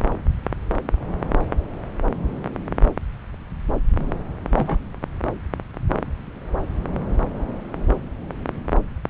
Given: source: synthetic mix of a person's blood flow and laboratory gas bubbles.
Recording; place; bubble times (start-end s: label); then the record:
Doppler ultrasound of blood flow; subclavian vein
4.54-4.78 s: bubbles
From the record:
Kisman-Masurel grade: 123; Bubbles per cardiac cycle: 1 to 2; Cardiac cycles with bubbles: 10 to 50%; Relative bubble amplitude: loud (0.450 to 0.775); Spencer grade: 2 (many but less than half of the cardiac periods contain bubble signals, singularly or in groups); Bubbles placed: anywhere in the cardiac cycle